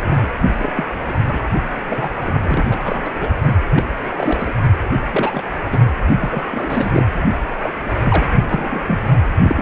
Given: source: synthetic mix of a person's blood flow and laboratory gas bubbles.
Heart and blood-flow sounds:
Doppler ultrasound of blood flow; precordium
0.05-0.30 s: bubbles
0.57-0.72 s: bubbles
0.75-0.84 s: bubbles
1.04-1.15 s: bubbles
1.26-1.40 s: bubbles
1.89-2.09 s: bubbles
2.16-2.78 s: bubbles
2.85-3.13 s: bubbles
3.19-3.31 s: bubbles
3.45-3.54 s: bubbles
3.66-3.84 s: bubbles
4.03-4.53 s: bubbles
5.13-5.43 s: bubbles
5.71-5.79 s: bubbles
6.21-6.42 s: bubbles
6.51-7.05 s: bubbles
7.21-7.26 s: bubbles
7.62-7.71 s: bubbles
7.83-8.24 s: bubbles
8.41-8.79 s: bubbles
8.88-9.00 s: bubbles
9.42-9.62 s: bubbles
From the record:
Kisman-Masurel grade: 242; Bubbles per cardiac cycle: several, 3 to 8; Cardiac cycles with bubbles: 100%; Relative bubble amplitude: moderate (0.250 to 0.450); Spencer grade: 3 (all of the cardiac periods contain showers or single bubble signals, but not dominating or overriding the cardiac motion signals); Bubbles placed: anywhere in the cardiac cycle

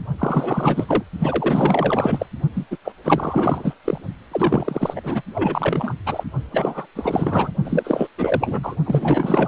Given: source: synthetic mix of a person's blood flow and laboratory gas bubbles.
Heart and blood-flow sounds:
Doppler ultrasound of blood flow; precordium
0.18-1.03 s: bubbles
1.19-2.26 s: bubbles
2.55-2.66 s: bubbles
2.71-2.77 s: bubbles
2.84-2.92 s: bubbles
3.04-3.74 s: bubbles
3.85-3.98 s: bubbles
4.31-5.22 s: bubbles
5.34-5.94 s: bubbles
6.06-6.24 s: bubbles
6.52-6.86 s: bubbles
6.95-7.52 s: bubbles
7.64-8.08 s: bubbles
8.17-8.75 s: bubbles
8.84-9.47 s: bubbles
From the record:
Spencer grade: 4 (maximum detectable bubble signal sounding continuously throughout systole and diastole of every cardiac period, and overriding the amplitude of the normal cardiac signals); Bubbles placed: only in the low amplitude regions of the cardiac cycle

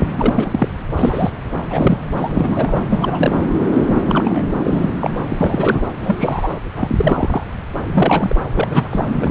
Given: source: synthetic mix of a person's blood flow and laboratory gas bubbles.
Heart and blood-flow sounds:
Doppler ultrasound of blood flow; subclavian vein
0.17-0.68 s: bubbles
0.96-1.31 s: bubbles
1.70-2.01 s: bubbles
2.15-2.81 s: bubbles
2.90-3.36 s: bubbles
3.71-4.42 s: bubbles
4.64-4.95 s: bubbles
5.01-5.10 s: bubbles
5.29-5.34 s: bubbles
5.37-5.83 s: bubbles
6.01-6.54 s: bubbles
6.75-7.44 s: bubbles
7.83-8.33 s: bubbles
8.54-9.05 s: bubbles
9.19-9.30 s: bubbles
From the record:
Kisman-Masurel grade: 243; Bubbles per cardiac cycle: several, 3 to 8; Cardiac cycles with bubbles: 100%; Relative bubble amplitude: loud (0.450 to 0.775); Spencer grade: 3 (all of the cardiac periods contain showers or single bubble signals, but not dominating or overriding the cardiac motion signals); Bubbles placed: anywhere in the cardiac cycle

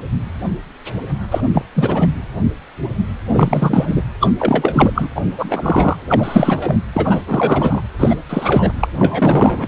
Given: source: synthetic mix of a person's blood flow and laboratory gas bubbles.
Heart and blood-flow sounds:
Doppler ultrasound of blood flow; precordium
1.31-1.41 s: bubbles
1.53-1.63 s: bubbles
1.74-2.07 s: bubbles
3.29-4.02 s: bubbles
4.20-4.30 s: bubbles
4.39-4.92 s: bubbles
4.94-5.09 s: bubbles
5.15-5.21 s: bubbles
5.38-5.96 s: bubbles
6.08-6.76 s: bubbles
6.93-7.22 s: bubbles
7.26-7.82 s: bubbles
7.99-8.16 s: bubbles
8.29-8.73 s: bubbles
8.79-8.89 s: bubbles
8.94-9.67 s: bubbles
From the record:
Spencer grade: 3 (all of the cardiac periods contain showers or single bubble signals, but not dominating or overriding the cardiac motion signals); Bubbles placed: anywhere in the cardiac cycle

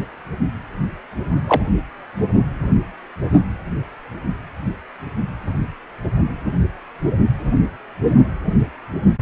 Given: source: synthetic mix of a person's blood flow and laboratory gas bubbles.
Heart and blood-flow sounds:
Doppler ultrasound of blood flow; precordium
1.47-1.61 s: bubbles
From the record:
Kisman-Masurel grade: 113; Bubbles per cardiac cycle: 1 to 2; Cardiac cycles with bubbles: 1 to 10%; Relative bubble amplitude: loud (0.450 to 0.775); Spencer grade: 1 (occasional bubble signal discernible with the cardiac motion signal, with majority of cardiac periods free of bubbles); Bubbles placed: only in the low amplitude regions of the cardiac cycle

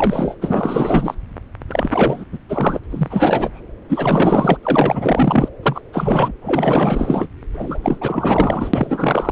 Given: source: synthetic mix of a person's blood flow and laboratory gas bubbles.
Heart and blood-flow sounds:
Doppler ultrasound of blood flow; subclavian vein
0.00-0.35 s: bubbles
0.41-1.15 s: bubbles
1.68-2.25 s: bubbles
2.32-2.38 s: bubbles
2.48-2.79 s: bubbles
2.83-2.86 s: bubbles
2.90-3.62 s: bubbles
3.89-4.57 s: bubbles
4.63-5.49 s: bubbles
5.63-5.81 s: bubbles
5.93-6.33 s: bubbles
6.41-7.28 s: bubbles
7.54-9.32 s: bubbles
From the record:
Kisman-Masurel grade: 444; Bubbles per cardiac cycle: continuous sound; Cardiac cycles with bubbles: 100%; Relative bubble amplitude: maximal (0.775 to 0.999); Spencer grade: 4 (maximum detectable bubble signal sounding continuously throughout systole and diastole of every cardiac period, and overriding the amplitude of the normal cardiac signals); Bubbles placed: anywhere in the cardiac cycle

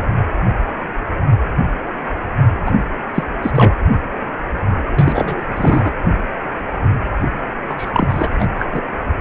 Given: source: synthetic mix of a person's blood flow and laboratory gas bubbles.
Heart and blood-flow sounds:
Doppler ultrasound of blood flow; precordium
2.65-2.75 s: bubbles
3.15-3.24 s: bubbles
3.42-3.52 s: bubbles
3.54-3.75 s: bubbles
4.92-5.45 s: bubbles
5.55-5.92 s: bubbles
7.69-7.74 s: bubbles
7.77-8.30 s: bubbles
8.39-8.49 s: bubbles
8.59-8.66 s: bubbles
8.71-8.82 s: bubbles
From the record:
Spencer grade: 2 (many but less than half of the cardiac periods contain bubble signals, singularly or in groups); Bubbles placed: anywhere in the cardiac cycle

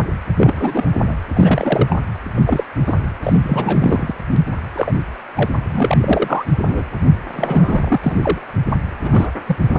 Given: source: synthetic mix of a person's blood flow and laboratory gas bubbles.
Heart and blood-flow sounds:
Doppler ultrasound of blood flow; precordium
0.00-0.02 s: bubbles
0.38-0.86 s: bubbles
1.02-1.15 s: bubbles
1.35-2.00 s: bubbles
2.33-2.64 s: bubbles
2.85-2.95 s: bubbles
3.23-4.15 s: bubbles
4.75-4.92 s: bubbles
5.36-5.50 s: bubbles
5.71-5.98 s: bubbles
6.03-6.44 s: bubbles
6.58-6.83 s: bubbles
7.33-7.98 s: bubbles
8.02-8.38 s: bubbles
9.03-9.30 s: bubbles
9.46-9.56 s: bubbles
9.73-9.78 s: bubbles
From the record:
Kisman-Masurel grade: 242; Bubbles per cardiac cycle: several, 3 to 8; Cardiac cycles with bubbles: 100%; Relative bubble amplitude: moderate (0.250 to 0.450); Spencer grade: 3 (all of the cardiac periods contain showers or single bubble signals, but not dominating or overriding the cardiac motion signals); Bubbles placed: anywhere in the cardiac cycle

